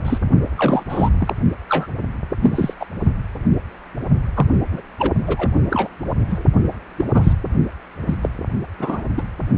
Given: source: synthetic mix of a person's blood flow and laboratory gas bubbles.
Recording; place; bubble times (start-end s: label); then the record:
Doppler ultrasound of blood flow; precordium
0.04-0.18 s: bubbles
0.56-0.83 s: bubbles
0.89-1.09 s: bubbles
1.20-1.33 s: bubbles
1.69-1.86 s: bubbles
2.40-2.73 s: bubbles
2.80-2.85 s: bubbles
4.35-4.47 s: bubbles
4.71-4.82 s: bubbles
4.99-5.12 s: bubbles
5.27-5.50 s: bubbles
5.70-5.89 s: bubbles
6.27-6.45 s: bubbles
6.97-7.05 s: bubbles
7.14-7.33 s: bubbles
8.06-8.15 s: bubbles
8.22-8.29 s: bubbles
8.79-9.03 s: bubbles
9.17-9.22 s: bubbles
From the record:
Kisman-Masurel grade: 233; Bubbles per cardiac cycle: several, 3 to 8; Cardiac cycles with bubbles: 50 to 99%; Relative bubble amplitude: loud (0.450 to 0.775); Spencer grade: 3 (all of the cardiac periods contain showers or single bubble signals, but not dominating or overriding the cardiac motion signals); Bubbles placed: only in the low amplitude regions of the cardiac cycle